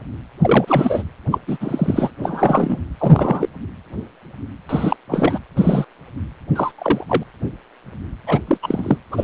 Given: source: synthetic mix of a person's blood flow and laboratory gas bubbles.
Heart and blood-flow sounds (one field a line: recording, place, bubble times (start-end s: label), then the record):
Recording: Doppler ultrasound of blood flow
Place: precordium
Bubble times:
0.41-1.03 s: bubbles
1.31-1.39 s: bubbles
1.47-1.57 s: bubbles
1.60-2.10 s: bubbles
2.23-2.81 s: bubbles
2.98-3.49 s: bubbles
4.69-4.96 s: bubbles
5.08-5.38 s: bubbles
5.57-5.84 s: bubbles
6.55-6.71 s: bubbles
6.78-7.04 s: bubbles
7.08-7.24 s: bubbles
8.27-8.39 s: bubbles
8.47-8.57 s: bubbles
8.62-8.98 s: bubbles
9.12-9.24 s: bubbles
From the record:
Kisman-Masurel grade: 233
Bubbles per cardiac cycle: several, 3 to 8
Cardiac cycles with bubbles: 50 to 99%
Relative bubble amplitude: loud (0.450 to 0.775)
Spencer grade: 3 (all of the cardiac periods contain showers or single bubble signals, but not dominating or overriding the cardiac motion signals)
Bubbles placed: anywhere in the cardiac cycle